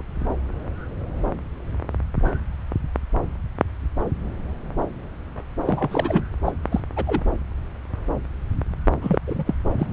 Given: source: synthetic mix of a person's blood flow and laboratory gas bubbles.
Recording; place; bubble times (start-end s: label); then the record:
Doppler ultrasound of blood flow; subclavian vein
0.00-0.03 s: bubbles
5.64-6.23 s: bubbles
6.44-6.52 s: bubbles
6.71-6.80 s: bubbles
6.96-7.04 s: bubbles
7.06-7.21 s: bubbles
9.01-9.19 s: bubbles
9.27-9.54 s: bubbles
9.78-9.87 s: bubbles
From the record:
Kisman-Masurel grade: 222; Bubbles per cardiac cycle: several, 3 to 8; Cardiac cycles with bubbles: 10 to 50%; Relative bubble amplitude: moderate (0.250 to 0.450); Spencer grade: 2 (many but less than half of the cardiac periods contain bubble signals, singularly or in groups); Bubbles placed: anywhere in the cardiac cycle